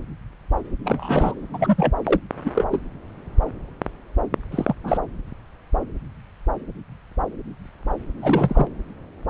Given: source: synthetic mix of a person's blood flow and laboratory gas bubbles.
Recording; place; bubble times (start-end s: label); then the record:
Doppler ultrasound of blood flow; subclavian vein
0.84-1.34 s: bubbles
1.53-1.94 s: bubbles
2.04-2.20 s: bubbles
2.44-2.51 s: bubbles
2.55-2.64 s: bubbles
2.71-2.79 s: bubbles
4.51-4.75 s: bubbles
4.83-5.00 s: bubbles
8.22-8.67 s: bubbles
From the record:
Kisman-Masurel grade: 222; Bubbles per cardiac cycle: several, 3 to 8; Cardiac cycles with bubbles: 10 to 50%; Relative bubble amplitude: moderate (0.250 to 0.450); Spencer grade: 2 (many but less than half of the cardiac periods contain bubble signals, singularly or in groups); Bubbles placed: anywhere in the cardiac cycle